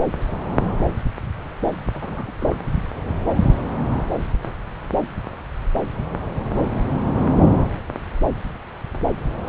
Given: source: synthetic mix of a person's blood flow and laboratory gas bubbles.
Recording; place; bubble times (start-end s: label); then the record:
Doppler ultrasound of blood flow; subclavian vein
1.94-2.32 s: bubbles
2.40-2.56 s: bubbles
From the record:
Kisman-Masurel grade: 211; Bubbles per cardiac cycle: several, 3 to 8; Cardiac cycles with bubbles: 1 to 10%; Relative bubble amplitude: barely perceptible (0.100 to 0.250); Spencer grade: 1 (occasional bubble signal discernible with the cardiac motion signal, with majority of cardiac periods free of bubbles); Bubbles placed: anywhere in the cardiac cycle